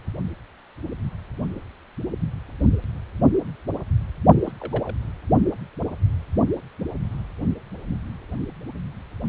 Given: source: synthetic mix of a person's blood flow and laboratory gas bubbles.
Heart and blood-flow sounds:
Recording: Doppler ultrasound of blood flow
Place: precordium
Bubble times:
4.45-4.52 s: bubbles
4.60-4.95 s: bubbles
From the record:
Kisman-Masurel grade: 121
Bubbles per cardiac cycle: 1 to 2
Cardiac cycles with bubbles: 10 to 50%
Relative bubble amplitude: barely perceptible (0.100 to 0.250)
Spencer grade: 2 (many but less than half of the cardiac periods contain bubble signals, singularly or in groups)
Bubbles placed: only in the low amplitude regions of the cardiac cycle

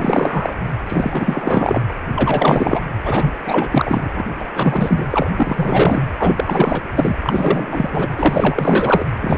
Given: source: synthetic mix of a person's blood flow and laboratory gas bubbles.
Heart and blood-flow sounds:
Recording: Doppler ultrasound of blood flow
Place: precordium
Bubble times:
0.00-0.56 s: bubbles
0.86-1.82 s: bubbles
2.16-2.81 s: bubbles
3.05-3.33 s: bubbles
3.46-4.09 s: bubbles
4.15-4.25 s: bubbles
4.39-4.45 s: bubbles
4.54-5.07 s: bubbles
5.10-5.30 s: bubbles
5.36-6.03 s: bubbles
6.18-6.83 s: bubbles
6.95-7.16 s: bubbles
7.24-8.09 s: bubbles
8.17-9.04 s: bubbles
9.20-9.38 s: bubbles
From the record:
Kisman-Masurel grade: 444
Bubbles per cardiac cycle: continuous sound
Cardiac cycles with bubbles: 100%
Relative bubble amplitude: maximal (0.775 to 0.999)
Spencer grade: 4 (maximum detectable bubble signal sounding continuously throughout systole and diastole of every cardiac period, and overriding the amplitude of the normal cardiac signals)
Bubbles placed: anywhere in the cardiac cycle

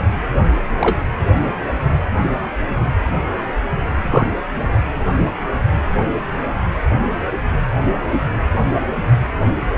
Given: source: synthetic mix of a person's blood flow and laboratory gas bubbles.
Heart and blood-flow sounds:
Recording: Doppler ultrasound of blood flow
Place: precordium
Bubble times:
0.80-0.96 s: bubbles
3.96-4.28 s: bubbles
From the record:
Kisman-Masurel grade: 123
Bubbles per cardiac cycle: 1 to 2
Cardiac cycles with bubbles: 10 to 50%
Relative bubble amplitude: loud (0.450 to 0.775)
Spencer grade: 2 (many but less than half of the cardiac periods contain bubble signals, singularly or in groups)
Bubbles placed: anywhere in the cardiac cycle

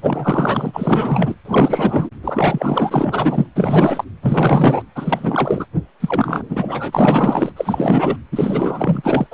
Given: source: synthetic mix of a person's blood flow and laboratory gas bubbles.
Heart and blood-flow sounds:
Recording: Doppler ultrasound of blood flow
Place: precordium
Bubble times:
0.02-1.35 s: bubbles
1.45-2.10 s: bubbles
2.23-3.46 s: bubbles
3.55-4.04 s: bubbles
4.21-4.82 s: bubbles
4.95-5.66 s: bubbles
6.00-6.43 s: bubbles
6.49-7.52 s: bubbles
7.56-8.17 s: bubbles
8.31-9.27 s: bubbles
9.30-9.34 s: bubbles
From the record:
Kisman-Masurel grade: 444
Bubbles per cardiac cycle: continuous sound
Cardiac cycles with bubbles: 100%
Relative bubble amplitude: maximal (0.775 to 0.999)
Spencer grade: 4 (maximum detectable bubble signal sounding continuously throughout systole and diastole of every cardiac period, and overriding the amplitude of the normal cardiac signals)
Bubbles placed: anywhere in the cardiac cycle

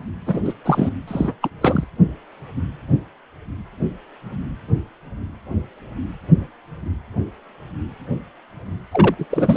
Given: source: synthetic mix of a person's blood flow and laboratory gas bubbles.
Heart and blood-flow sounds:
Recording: Doppler ultrasound of blood flow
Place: precordium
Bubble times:
0.25-0.40 s: bubbles
0.44-0.53 s: bubbles
0.65-0.90 s: bubbles
1.07-1.33 s: bubbles
1.42-1.49 s: bubbles
1.61-1.84 s: bubbles
8.92-9.15 s: bubbles
9.19-9.25 s: bubbles
9.30-9.56 s: bubbles
From the record:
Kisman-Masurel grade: 222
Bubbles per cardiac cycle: several, 3 to 8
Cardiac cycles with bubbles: 10 to 50%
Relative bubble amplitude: moderate (0.250 to 0.450)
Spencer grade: 2 (many but less than half of the cardiac periods contain bubble signals, singularly or in groups)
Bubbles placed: anywhere in the cardiac cycle

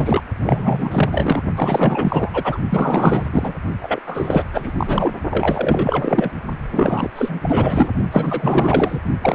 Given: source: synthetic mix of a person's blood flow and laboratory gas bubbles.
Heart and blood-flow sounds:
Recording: Doppler ultrasound of blood flow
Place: precordium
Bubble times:
0.00-0.24 s: bubbles
0.43-1.42 s: bubbles
1.55-2.60 s: bubbles
2.70-3.27 s: bubbles
3.32-3.54 s: bubbles
3.81-4.00 s: bubbles
4.07-4.45 s: bubbles
4.52-5.15 s: bubbles
5.30-6.31 s: bubbles
6.72-7.09 s: bubbles
7.15-7.90 s: bubbles
8.12-9.01 s: bubbles
9.22-9.35 s: bubbles
From the record:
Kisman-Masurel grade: 444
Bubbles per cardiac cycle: continuous sound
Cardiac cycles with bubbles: 100%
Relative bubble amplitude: maximal (0.775 to 0.999)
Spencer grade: 4 (maximum detectable bubble signal sounding continuously throughout systole and diastole of every cardiac period, and overriding the amplitude of the normal cardiac signals)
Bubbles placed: only in the low amplitude regions of the cardiac cycle

